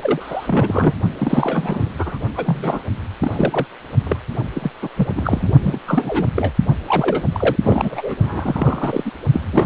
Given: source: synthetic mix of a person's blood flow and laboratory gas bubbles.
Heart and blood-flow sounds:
Doppler ultrasound of blood flow; precordium
0.03-0.94 s: bubbles
1.19-1.90 s: bubbles
1.98-2.19 s: bubbles
2.35-2.82 s: bubbles
3.21-3.66 s: bubbles
4.04-4.17 s: bubbles
4.54-4.71 s: bubbles
4.82-4.88 s: bubbles
4.96-5.53 s: bubbles
5.62-5.79 s: bubbles
5.87-6.26 s: bubbles
6.36-6.52 s: bubbles
6.87-7.26 s: bubbles
7.32-7.56 s: bubbles
7.63-8.15 s: bubbles
8.22-9.11 s: bubbles
9.33-9.40 s: bubbles
9.53-9.66 s: bubbles
From the record:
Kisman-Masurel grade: 342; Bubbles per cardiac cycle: rolling drumbeat, 9 or more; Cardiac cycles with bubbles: 100%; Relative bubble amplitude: moderate (0.250 to 0.450); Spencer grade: 3 (all of the cardiac periods contain showers or single bubble signals, but not dominating or overriding the cardiac motion signals); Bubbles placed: only in the low amplitude regions of the cardiac cycle

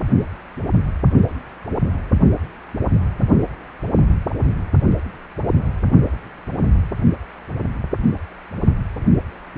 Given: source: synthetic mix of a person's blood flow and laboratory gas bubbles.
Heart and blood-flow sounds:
Doppler ultrasound of blood flow; precordium
no bubbles
From the record:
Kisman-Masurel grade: 000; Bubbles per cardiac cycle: 0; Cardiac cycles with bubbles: 0%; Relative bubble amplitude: no bubbles discernible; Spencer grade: 0 (complete lack of bubble signals)

